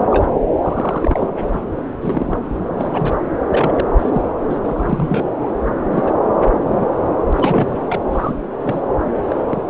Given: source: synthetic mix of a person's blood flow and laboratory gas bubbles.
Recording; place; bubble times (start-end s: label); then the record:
Doppler ultrasound of blood flow; subclavian vein
0.11-0.30 s: bubbles
0.61-1.43 s: bubbles
1.52-1.64 s: bubbles
2.01-2.37 s: bubbles
2.77-3.15 s: bubbles
3.49-3.87 s: bubbles
3.98-4.21 s: bubbles
4.49-4.59 s: bubbles
4.62-5.27 s: bubbles
5.90-6.11 s: bubbles
6.63-6.86 s: bubbles
7.27-8.00 s: bubbles
8.11-8.36 s: bubbles
8.62-8.80 s: bubbles
9.29-9.36 s: bubbles
9.50-9.65 s: bubbles
From the record:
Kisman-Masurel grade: 242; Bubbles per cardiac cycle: several, 3 to 8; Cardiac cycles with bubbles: 100%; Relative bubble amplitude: moderate (0.250 to 0.450); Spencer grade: 3 (all of the cardiac periods contain showers or single bubble signals, but not dominating or overriding the cardiac motion signals); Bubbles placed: anywhere in the cardiac cycle